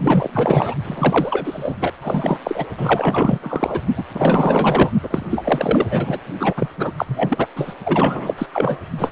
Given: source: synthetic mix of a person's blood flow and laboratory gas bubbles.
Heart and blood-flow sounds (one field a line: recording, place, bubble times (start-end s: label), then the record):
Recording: Doppler ultrasound of blood flow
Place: precordium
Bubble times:
0.00-0.75 s: bubbles
0.84-1.76 s: bubbles
1.80-1.94 s: bubbles
2.02-2.38 s: bubbles
2.44-2.65 s: bubbles
2.77-3.39 s: bubbles
3.42-3.81 s: bubbles
3.95-4.04 s: bubbles
4.12-4.90 s: bubbles
5.03-5.26 s: bubbles
5.30-5.86 s: bubbles
5.89-6.19 s: bubbles
6.40-6.54 s: bubbles
6.57-6.69 s: bubbles
6.78-6.93 s: bubbles
6.97-7.47 s: bubbles
7.56-7.75 s: bubbles
7.83-8.34 s: bubbles
8.38-8.46 s: bubbles
8.53-8.87 s: bubbles
8.97-9.11 s: bubbles
From the record:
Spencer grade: 4 (maximum detectable bubble signal sounding continuously throughout systole and diastole of every cardiac period, and overriding the amplitude of the normal cardiac signals)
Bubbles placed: only in the low amplitude regions of the cardiac cycle